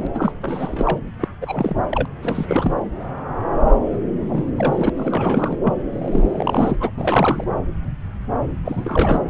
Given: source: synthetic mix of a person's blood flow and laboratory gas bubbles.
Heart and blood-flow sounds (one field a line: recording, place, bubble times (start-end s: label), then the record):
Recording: Doppler ultrasound of blood flow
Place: subclavian vein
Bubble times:
0.00-0.07 s: bubbles
0.14-0.32 s: bubbles
0.42-0.98 s: bubbles
1.20-1.28 s: bubbles
1.41-1.75 s: bubbles
1.91-2.06 s: bubbles
2.22-2.72 s: bubbles
3.92-3.98 s: bubbles
4.29-4.50 s: bubbles
4.56-4.89 s: bubbles
4.96-5.58 s: bubbles
5.63-5.75 s: bubbles
5.92-6.77 s: bubbles
6.80-6.91 s: bubbles
6.97-7.44 s: bubbles
8.64-9.20 s: bubbles
From the record:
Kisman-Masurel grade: 332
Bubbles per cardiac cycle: rolling drumbeat, 9 or more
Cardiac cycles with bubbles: 50 to 99%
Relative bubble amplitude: moderate (0.250 to 0.450)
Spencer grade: 3 (all of the cardiac periods contain showers or single bubble signals, but not dominating or overriding the cardiac motion signals)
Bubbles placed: anywhere in the cardiac cycle